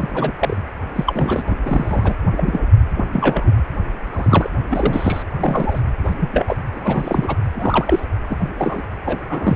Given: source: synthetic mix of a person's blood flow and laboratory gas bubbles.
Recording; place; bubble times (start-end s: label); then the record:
Doppler ultrasound of blood flow; precordium
0.00-0.32 s: bubbles
0.39-0.62 s: bubbles
0.96-1.55 s: bubbles
1.65-2.15 s: bubbles
2.36-2.60 s: bubbles
2.96-3.09 s: bubbles
3.12-3.54 s: bubbles
4.12-4.49 s: bubbles
4.70-5.23 s: bubbles
5.40-5.81 s: bubbles
6.05-6.14 s: bubbles
6.20-6.56 s: bubbles
6.75-7.35 s: bubbles
7.54-8.05 s: bubbles
8.29-8.37 s: bubbles
8.40-8.50 s: bubbles
8.59-8.82 s: bubbles
9.06-9.19 s: bubbles
9.29-9.56 s: bubbles
From the record:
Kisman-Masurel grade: 242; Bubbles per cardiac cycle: several, 3 to 8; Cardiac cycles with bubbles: 100%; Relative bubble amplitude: moderate (0.250 to 0.450); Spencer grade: 3 (all of the cardiac periods contain showers or single bubble signals, but not dominating or overriding the cardiac motion signals); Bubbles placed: anywhere in the cardiac cycle